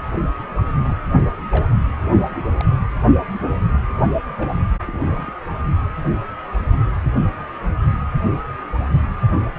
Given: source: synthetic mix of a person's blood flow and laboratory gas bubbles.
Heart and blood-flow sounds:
Doppler ultrasound of blood flow; precordium
0.83-0.96 s: bubbles
1.49-1.66 s: bubbles
2.28-2.36 s: bubbles
2.59-2.65 s: bubbles
4.37-4.50 s: bubbles
4.87-5.33 s: bubbles
From the record:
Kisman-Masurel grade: 121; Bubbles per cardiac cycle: 1 to 2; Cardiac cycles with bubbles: 10 to 50%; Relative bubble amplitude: barely perceptible (0.100 to 0.250); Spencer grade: 2 (many but less than half of the cardiac periods contain bubble signals, singularly or in groups); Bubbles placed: only in the low amplitude regions of the cardiac cycle

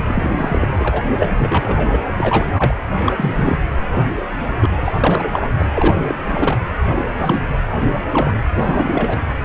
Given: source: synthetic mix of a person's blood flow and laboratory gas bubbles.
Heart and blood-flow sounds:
Doppler ultrasound of blood flow; precordium
0.00-0.02 s: bubbles
0.04-0.68 s: bubbles
0.79-1.01 s: bubbles
1.18-1.29 s: bubbles
1.31-2.00 s: bubbles
2.18-2.48 s: bubbles
2.57-2.75 s: bubbles
3.04-3.58 s: bubbles
3.82-4.10 s: bubbles
4.12-4.20 s: bubbles
4.61-4.70 s: bubbles
4.85-4.94 s: bubbles
4.98-5.51 s: bubbles
5.59-5.65 s: bubbles
5.74-6.15 s: bubbles
6.26-6.59 s: bubbles
7.19-7.42 s: bubbles
7.83-7.88 s: bubbles
8.11-8.33 s: bubbles
8.57-9.19 s: bubbles
From the record:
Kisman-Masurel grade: 232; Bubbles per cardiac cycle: several, 3 to 8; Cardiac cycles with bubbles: 50 to 99%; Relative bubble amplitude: moderate (0.250 to 0.450); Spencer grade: 3 (all of the cardiac periods contain showers or single bubble signals, but not dominating or overriding the cardiac motion signals); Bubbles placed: anywhere in the cardiac cycle

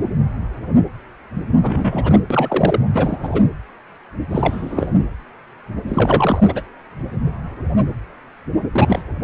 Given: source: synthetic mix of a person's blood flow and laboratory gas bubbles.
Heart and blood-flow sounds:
Doppler ultrasound of blood flow; precordium
1.61-2.20 s: bubbles
2.30-2.81 s: bubbles
2.93-3.42 s: bubbles
4.30-4.90 s: bubbles
5.88-6.63 s: bubbles
8.72-9.04 s: bubbles
From the record:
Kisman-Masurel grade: 223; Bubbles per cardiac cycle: several, 3 to 8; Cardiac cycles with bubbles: 10 to 50%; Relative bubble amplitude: loud (0.450 to 0.775); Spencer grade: 2 (many but less than half of the cardiac periods contain bubble signals, singularly or in groups); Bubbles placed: anywhere in the cardiac cycle

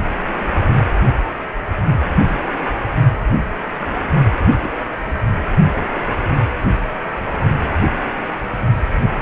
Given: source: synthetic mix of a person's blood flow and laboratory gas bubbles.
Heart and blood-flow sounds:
Doppler ultrasound of blood flow; precordium
4.60-4.71 s: bubbles
5.06-5.17 s: bubbles
From the record:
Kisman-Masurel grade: 121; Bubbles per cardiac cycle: 1 to 2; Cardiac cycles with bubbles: 10 to 50%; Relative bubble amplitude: barely perceptible (0.100 to 0.250); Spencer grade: 2 (many but less than half of the cardiac periods contain bubble signals, singularly or in groups); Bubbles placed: only in the low amplitude regions of the cardiac cycle

